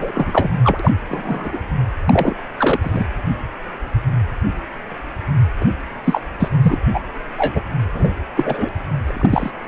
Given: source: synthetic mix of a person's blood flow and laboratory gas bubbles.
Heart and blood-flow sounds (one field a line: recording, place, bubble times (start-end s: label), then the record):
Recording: Doppler ultrasound of blood flow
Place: precordium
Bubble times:
0.00-0.11 s: bubbles
0.14-0.50 s: bubbles
0.64-0.91 s: bubbles
1.09-1.60 s: bubbles
2.06-2.35 s: bubbles
2.58-2.79 s: bubbles
2.81-3.05 s: bubbles
5.60-5.65 s: bubbles
6.04-6.21 s: bubbles
6.39-6.49 s: bubbles
6.62-6.78 s: bubbles
6.94-7.02 s: bubbles
7.37-7.62 s: bubbles
7.94-8.12 s: bubbles
8.37-8.69 s: bubbles
9.05-9.51 s: bubbles
From the record:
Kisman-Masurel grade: 233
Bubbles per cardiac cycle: several, 3 to 8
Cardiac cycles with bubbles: 50 to 99%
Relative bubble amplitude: loud (0.450 to 0.775)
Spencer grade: 3 (all of the cardiac periods contain showers or single bubble signals, but not dominating or overriding the cardiac motion signals)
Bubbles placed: anywhere in the cardiac cycle